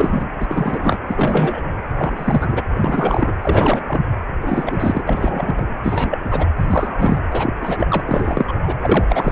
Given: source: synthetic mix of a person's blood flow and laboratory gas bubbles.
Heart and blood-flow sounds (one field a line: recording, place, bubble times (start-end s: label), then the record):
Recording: Doppler ultrasound of blood flow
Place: precordium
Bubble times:
0.00-0.29 s: bubbles
0.40-0.46 s: bubbles
0.48-0.98 s: bubbles
1.08-1.62 s: bubbles
1.96-2.62 s: bubbles
2.74-3.32 s: bubbles
3.42-3.83 s: bubbles
3.86-4.02 s: bubbles
4.42-5.03 s: bubbles
5.08-5.66 s: bubbles
5.83-6.19 s: bubbles
6.24-6.48 s: bubbles
6.57-7.21 s: bubbles
7.32-7.54 s: bubbles
7.62-8.53 s: bubbles
8.62-8.75 s: bubbles
8.81-9.05 s: bubbles
9.09-9.32 s: bubbles
From the record:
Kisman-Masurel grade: 343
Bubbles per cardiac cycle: rolling drumbeat, 9 or more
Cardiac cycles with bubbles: 100%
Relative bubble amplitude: loud (0.450 to 0.775)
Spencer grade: 3 (all of the cardiac periods contain showers or single bubble signals, but not dominating or overriding the cardiac motion signals)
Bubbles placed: anywhere in the cardiac cycle